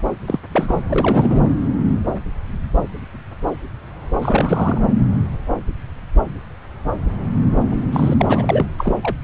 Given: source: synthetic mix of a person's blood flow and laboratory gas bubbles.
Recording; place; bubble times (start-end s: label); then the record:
Doppler ultrasound of blood flow; subclavian vein
0.26-0.40 s: bubbles
0.52-0.80 s: bubbles
0.89-1.44 s: bubbles
4.21-4.81 s: bubbles
7.52-7.59 s: bubbles
7.70-7.78 s: bubbles
7.92-8.14 s: bubbles
8.18-8.65 s: bubbles
8.78-8.96 s: bubbles
9.02-9.16 s: bubbles
From the record:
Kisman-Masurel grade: 222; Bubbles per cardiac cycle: several, 3 to 8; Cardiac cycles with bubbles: 10 to 50%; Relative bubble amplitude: moderate (0.250 to 0.450); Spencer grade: 2 (many but less than half of the cardiac periods contain bubble signals, singularly or in groups); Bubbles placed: anywhere in the cardiac cycle